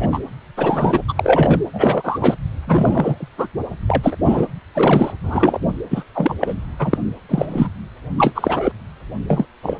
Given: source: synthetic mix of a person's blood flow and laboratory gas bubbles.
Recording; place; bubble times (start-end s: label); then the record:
Doppler ultrasound of blood flow; precordium
0.00-0.07 s: bubbles
0.11-0.20 s: bubbles
0.57-1.02 s: bubbles
1.08-1.13 s: bubbles
1.15-1.60 s: bubbles
1.73-2.35 s: bubbles
2.67-3.29 s: bubbles
3.38-3.47 s: bubbles
3.87-4.16 s: bubbles
4.25-4.46 s: bubbles
4.74-5.12 s: bubbles
5.23-5.66 s: bubbles
5.90-6.04 s: bubbles
6.15-6.34 s: bubbles
6.41-6.54 s: bubbles
6.79-6.98 s: bubbles
7.29-7.68 s: bubbles
8.17-8.71 s: bubbles
9.27-9.46 s: bubbles
9.62-9.77 s: bubbles
From the record:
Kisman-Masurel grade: 233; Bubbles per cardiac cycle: several, 3 to 8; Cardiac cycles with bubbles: 50 to 99%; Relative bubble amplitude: loud (0.450 to 0.775); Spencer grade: 3 (all of the cardiac periods contain showers or single bubble signals, but not dominating or overriding the cardiac motion signals); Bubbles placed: anywhere in the cardiac cycle